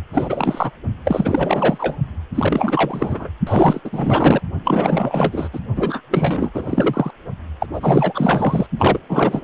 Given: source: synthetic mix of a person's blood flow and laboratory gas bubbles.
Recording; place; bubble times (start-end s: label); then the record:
Doppler ultrasound of blood flow; precordium
0.12-0.71 s: bubbles
1.04-1.96 s: bubbles
2.35-3.29 s: bubbles
3.46-3.81 s: bubbles
3.85-4.40 s: bubbles
4.64-5.48 s: bubbles
5.53-5.60 s: bubbles
5.76-6.01 s: bubbles
6.11-7.11 s: bubbles
7.59-7.67 s: bubbles
7.73-8.66 s: bubbles
8.78-8.99 s: bubbles
9.09-9.40 s: bubbles
From the record:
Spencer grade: 4 (maximum detectable bubble signal sounding continuously throughout systole and diastole of every cardiac period, and overriding the amplitude of the normal cardiac signals); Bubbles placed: only in the low amplitude regions of the cardiac cycle